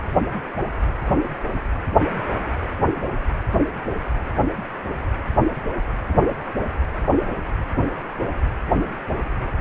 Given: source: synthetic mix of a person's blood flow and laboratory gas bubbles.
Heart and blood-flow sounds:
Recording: Doppler ultrasound of blood flow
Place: precordium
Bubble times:
no bubbles
From the record:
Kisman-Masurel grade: 000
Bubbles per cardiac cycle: 0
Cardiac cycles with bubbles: 0%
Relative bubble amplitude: no bubbles discernible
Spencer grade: 0 (complete lack of bubble signals)

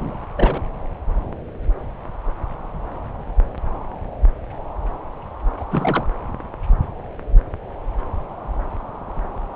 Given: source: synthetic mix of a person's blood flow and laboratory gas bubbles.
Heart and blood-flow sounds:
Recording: Doppler ultrasound of blood flow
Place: subclavian vein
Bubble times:
0.00-0.19 s: bubbles
0.36-0.62 s: bubbles
5.60-5.65 s: bubbles
5.71-6.06 s: bubbles
From the record:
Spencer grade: 2 (many but less than half of the cardiac periods contain bubble signals, singularly or in groups)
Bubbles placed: anywhere in the cardiac cycle

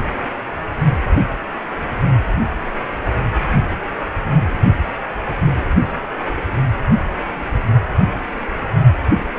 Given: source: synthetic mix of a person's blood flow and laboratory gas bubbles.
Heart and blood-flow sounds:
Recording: Doppler ultrasound of blood flow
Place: precordium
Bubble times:
8.96-9.00 s: bubbles
9.13-9.28 s: bubbles
From the record:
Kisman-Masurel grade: 211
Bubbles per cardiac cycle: several, 3 to 8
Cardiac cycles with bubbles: 1 to 10%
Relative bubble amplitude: barely perceptible (0.100 to 0.250)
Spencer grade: 1 (occasional bubble signal discernible with the cardiac motion signal, with majority of cardiac periods free of bubbles)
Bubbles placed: only in the low amplitude regions of the cardiac cycle

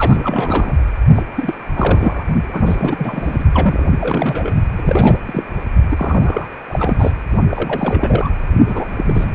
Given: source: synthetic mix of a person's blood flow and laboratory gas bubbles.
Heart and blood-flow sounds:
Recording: Doppler ultrasound of blood flow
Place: precordium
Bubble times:
0.00-0.74 s: bubbles
1.15-1.23 s: bubbles
1.35-1.54 s: bubbles
1.76-2.24 s: bubbles
2.48-2.62 s: bubbles
2.65-3.44 s: bubbles
3.53-3.85 s: bubbles
4.00-4.52 s: bubbles
4.76-5.20 s: bubbles
5.25-5.45 s: bubbles
5.90-6.46 s: bubbles
6.67-7.12 s: bubbles
7.50-8.31 s: bubbles
8.68-9.35 s: bubbles
From the record:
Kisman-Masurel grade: 342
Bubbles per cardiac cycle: rolling drumbeat, 9 or more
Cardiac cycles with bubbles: 100%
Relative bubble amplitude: moderate (0.250 to 0.450)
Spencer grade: 3 (all of the cardiac periods contain showers or single bubble signals, but not dominating or overriding the cardiac motion signals)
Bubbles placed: only in the low amplitude regions of the cardiac cycle

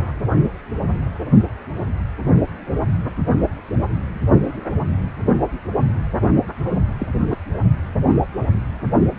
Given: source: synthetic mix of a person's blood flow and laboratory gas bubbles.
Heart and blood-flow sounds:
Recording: Doppler ultrasound of blood flow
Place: precordium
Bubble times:
0.00-0.11 s: bubbles
6.99-7.07 s: bubbles
7.30-7.37 s: bubbles
From the record:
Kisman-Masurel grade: 121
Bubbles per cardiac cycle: 1 to 2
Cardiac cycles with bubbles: 10 to 50%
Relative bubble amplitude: barely perceptible (0.100 to 0.250)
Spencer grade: 2 (many but less than half of the cardiac periods contain bubble signals, singularly or in groups)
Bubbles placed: only in the low amplitude regions of the cardiac cycle

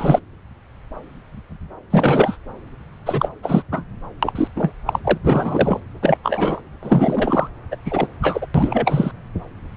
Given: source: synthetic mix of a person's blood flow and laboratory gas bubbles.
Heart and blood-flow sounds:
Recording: Doppler ultrasound of blood flow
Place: subclavian vein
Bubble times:
0.00-0.20 s: bubbles
1.90-2.37 s: bubbles
3.06-3.29 s: bubbles
3.43-3.62 s: bubbles
3.72-3.84 s: bubbles
4.23-4.48 s: bubbles
4.55-4.73 s: bubbles
4.87-4.99 s: bubbles
5.04-5.18 s: bubbles
5.24-5.80 s: bubbles
6.01-6.17 s: bubbles
6.24-6.60 s: bubbles
6.83-7.48 s: bubbles
7.71-7.75 s: bubbles
7.85-8.07 s: bubbles
8.21-8.46 s: bubbles
8.54-9.11 s: bubbles
From the record:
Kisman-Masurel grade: 333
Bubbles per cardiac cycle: rolling drumbeat, 9 or more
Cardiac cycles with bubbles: 50 to 99%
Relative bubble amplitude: loud (0.450 to 0.775)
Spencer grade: 3 (all of the cardiac periods contain showers or single bubble signals, but not dominating or overriding the cardiac motion signals)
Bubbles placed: anywhere in the cardiac cycle

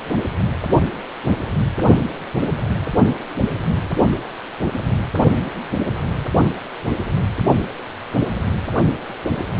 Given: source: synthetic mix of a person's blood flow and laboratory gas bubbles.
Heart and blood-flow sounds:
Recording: Doppler ultrasound of blood flow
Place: precordium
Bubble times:
no bubbles
From the record:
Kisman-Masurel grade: 000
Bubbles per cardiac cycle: 0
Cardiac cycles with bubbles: 0%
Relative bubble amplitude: no bubbles discernible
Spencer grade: 0 (complete lack of bubble signals)

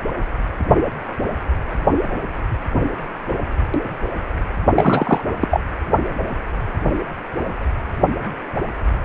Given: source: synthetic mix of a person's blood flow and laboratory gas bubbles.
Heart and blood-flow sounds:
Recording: Doppler ultrasound of blood flow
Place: precordium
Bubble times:
4.75-5.21 s: bubbles
5.41-5.61 s: bubbles
From the record:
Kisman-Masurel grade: 213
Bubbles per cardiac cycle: several, 3 to 8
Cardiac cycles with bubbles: 1 to 10%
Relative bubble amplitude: loud (0.450 to 0.775)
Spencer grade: 1 (occasional bubble signal discernible with the cardiac motion signal, with majority of cardiac periods free of bubbles)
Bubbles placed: only in the low amplitude regions of the cardiac cycle

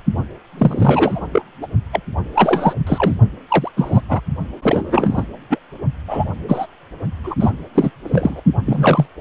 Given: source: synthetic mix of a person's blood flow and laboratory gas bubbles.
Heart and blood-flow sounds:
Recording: Doppler ultrasound of blood flow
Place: precordium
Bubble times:
0.57-1.26 s: bubbles
1.32-1.42 s: bubbles
1.62-1.67 s: bubbles
1.92-2.00 s: bubbles
2.35-2.74 s: bubbles
2.87-3.15 s: bubbles
3.48-3.71 s: bubbles
3.76-4.01 s: bubbles
4.08-4.21 s: bubbles
4.62-5.24 s: bubbles
5.50-5.58 s: bubbles
6.08-6.24 s: bubbles
6.48-6.67 s: bubbles
7.23-7.35 s: bubbles
7.39-7.50 s: bubbles
7.75-7.91 s: bubbles
8.03-8.42 s: bubbles
8.65-9.08 s: bubbles
From the record:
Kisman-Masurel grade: 243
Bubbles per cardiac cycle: several, 3 to 8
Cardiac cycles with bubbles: 100%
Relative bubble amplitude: loud (0.450 to 0.775)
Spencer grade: 3 (all of the cardiac periods contain showers or single bubble signals, but not dominating or overriding the cardiac motion signals)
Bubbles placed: only in the low amplitude regions of the cardiac cycle

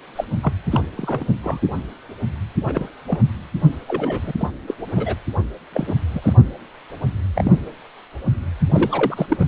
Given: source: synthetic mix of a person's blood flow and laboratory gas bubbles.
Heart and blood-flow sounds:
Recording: Doppler ultrasound of blood flow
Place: precordium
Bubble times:
0.16-0.24 s: bubbles
0.43-0.53 s: bubbles
0.71-0.80 s: bubbles
0.97-1.25 s: bubbles
1.43-1.59 s: bubbles
2.67-2.88 s: bubbles
3.07-3.18 s: bubbles
3.88-4.21 s: bubbles
4.23-4.33 s: bubbles
4.38-4.49 s: bubbles
4.67-4.75 s: bubbles
4.96-5.16 s: bubbles
5.74-5.94 s: bubbles
6.14-6.33 s: bubbles
7.36-7.53 s: bubbles
8.69-9.46 s: bubbles
From the record:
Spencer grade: 3 (all of the cardiac periods contain showers or single bubble signals, but not dominating or overriding the cardiac motion signals)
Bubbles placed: anywhere in the cardiac cycle

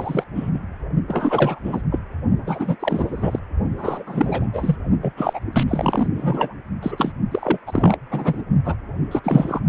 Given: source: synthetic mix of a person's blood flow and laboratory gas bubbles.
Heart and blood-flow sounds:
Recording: Doppler ultrasound of blood flow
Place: precordium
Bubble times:
0.00-0.24 s: bubbles
0.35-0.50 s: bubbles
0.54-0.60 s: bubbles
1.08-1.60 s: bubbles
1.64-1.82 s: bubbles
1.91-1.99 s: bubbles
2.46-2.76 s: bubbles
2.79-3.39 s: bubbles
3.77-4.48 s: bubbles
4.53-4.76 s: bubbles
5.02-5.14 s: bubbles
5.17-5.40 s: bubbles
5.53-5.64 s: bubbles
5.68-6.08 s: bubbles
6.16-6.54 s: bubbles
6.83-7.13 s: bubbles
7.31-7.58 s: bubbles
7.67-7.97 s: bubbles
8.10-8.42 s: bubbles
8.64-8.76 s: bubbles
9.11-9.21 s: bubbles
9.24-9.59 s: bubbles
From the record:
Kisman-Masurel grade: 343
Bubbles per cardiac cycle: rolling drumbeat, 9 or more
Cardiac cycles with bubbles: 100%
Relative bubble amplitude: loud (0.450 to 0.775)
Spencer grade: 3 (all of the cardiac periods contain showers or single bubble signals, but not dominating or overriding the cardiac motion signals)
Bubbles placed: only in the low amplitude regions of the cardiac cycle

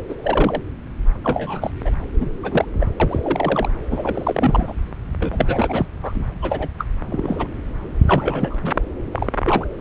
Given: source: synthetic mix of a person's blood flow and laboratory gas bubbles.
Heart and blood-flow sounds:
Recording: Doppler ultrasound of blood flow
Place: subclavian vein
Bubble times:
0.09-0.15 s: bubbles
0.23-0.60 s: bubbles
1.23-1.71 s: bubbles
1.84-1.91 s: bubbles
2.20-2.31 s: bubbles
2.43-2.65 s: bubbles
2.80-2.87 s: bubbles
3.00-3.20 s: bubbles
3.23-3.69 s: bubbles
3.91-4.73 s: bubbles
5.20-5.86 s: bubbles
6.02-6.26 s: bubbles
6.42-6.68 s: bubbles
6.78-6.84 s: bubbles
7.09-7.47 s: bubbles
8.07-8.55 s: bubbles
8.63-8.75 s: bubbles
9.11-9.28 s: bubbles
9.45-9.67 s: bubbles
9.78-9.81 s: bubbles
From the record:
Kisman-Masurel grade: 242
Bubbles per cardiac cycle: several, 3 to 8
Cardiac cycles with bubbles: 100%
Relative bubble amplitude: moderate (0.250 to 0.450)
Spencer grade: 3 (all of the cardiac periods contain showers or single bubble signals, but not dominating or overriding the cardiac motion signals)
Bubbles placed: anywhere in the cardiac cycle

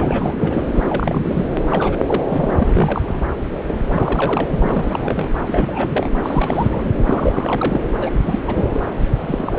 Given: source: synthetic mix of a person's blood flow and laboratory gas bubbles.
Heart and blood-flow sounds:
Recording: Doppler ultrasound of blood flow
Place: subclavian vein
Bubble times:
0.00-0.35 s: bubbles
0.39-0.70 s: bubbles
0.72-0.84 s: bubbles
0.88-1.47 s: bubbles
1.70-1.97 s: bubbles
2.07-2.23 s: bubbles
2.27-3.22 s: bubbles
3.66-3.79 s: bubbles
3.87-4.48 s: bubbles
4.50-5.29 s: bubbles
5.46-6.09 s: bubbles
6.23-6.92 s: bubbles
7.04-7.81 s: bubbles
7.98-8.11 s: bubbles
8.24-8.39 s: bubbles
8.47-8.84 s: bubbles
8.98-9.07 s: bubbles
9.19-9.59 s: bubbles
From the record:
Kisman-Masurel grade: 342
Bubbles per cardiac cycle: rolling drumbeat, 9 or more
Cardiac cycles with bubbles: 100%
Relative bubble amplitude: moderate (0.250 to 0.450)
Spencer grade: 3 (all of the cardiac periods contain showers or single bubble signals, but not dominating or overriding the cardiac motion signals)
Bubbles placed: anywhere in the cardiac cycle

